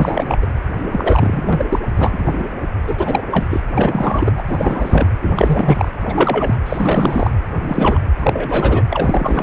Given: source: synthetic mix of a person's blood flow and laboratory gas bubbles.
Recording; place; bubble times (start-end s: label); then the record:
Doppler ultrasound of blood flow; precordium
0.00-0.38 s: bubbles
0.41-0.46 s: bubbles
0.82-1.65 s: bubbles
1.69-1.79 s: bubbles
1.97-2.44 s: bubbles
2.87-3.24 s: bubbles
3.31-3.46 s: bubbles
3.49-3.60 s: bubbles
3.77-4.32 s: bubbles
4.37-4.43 s: bubbles
4.47-5.10 s: bubbles
5.22-5.92 s: bubbles
6.00-6.56 s: bubbles
6.66-7.31 s: bubbles
7.61-8.00 s: bubbles
8.18-8.82 s: bubbles
8.90-9.42 s: bubbles
From the record:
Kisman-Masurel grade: 342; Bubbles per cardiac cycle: rolling drumbeat, 9 or more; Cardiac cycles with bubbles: 100%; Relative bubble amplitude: moderate (0.250 to 0.450); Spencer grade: 3 (all of the cardiac periods contain showers or single bubble signals, but not dominating or overriding the cardiac motion signals); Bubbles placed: anywhere in the cardiac cycle